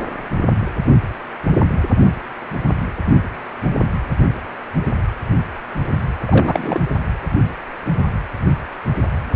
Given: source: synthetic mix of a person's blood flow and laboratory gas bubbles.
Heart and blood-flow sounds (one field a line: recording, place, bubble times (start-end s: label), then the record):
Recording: Doppler ultrasound of blood flow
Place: precordium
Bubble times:
6.28-6.80 s: bubbles
From the record:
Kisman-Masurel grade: 222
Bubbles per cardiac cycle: several, 3 to 8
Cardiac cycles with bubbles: 10 to 50%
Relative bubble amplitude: moderate (0.250 to 0.450)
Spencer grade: 2 (many but less than half of the cardiac periods contain bubble signals, singularly or in groups)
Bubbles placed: anywhere in the cardiac cycle